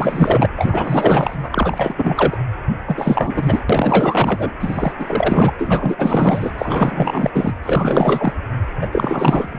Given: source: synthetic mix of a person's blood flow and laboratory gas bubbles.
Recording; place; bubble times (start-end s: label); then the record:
Doppler ultrasound of blood flow; precordium
0.00-0.46 s: bubbles
0.56-2.38 s: bubbles
2.87-3.65 s: bubbles
3.70-4.52 s: bubbles
4.60-4.92 s: bubbles
4.98-5.53 s: bubbles
5.58-6.51 s: bubbles
6.58-7.30 s: bubbles
7.33-7.53 s: bubbles
7.62-8.33 s: bubbles
8.81-8.87 s: bubbles
8.91-9.59 s: bubbles
From the record:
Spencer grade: 4 (maximum detectable bubble signal sounding continuously throughout systole and diastole of every cardiac period, and overriding the amplitude of the normal cardiac signals); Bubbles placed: anywhere in the cardiac cycle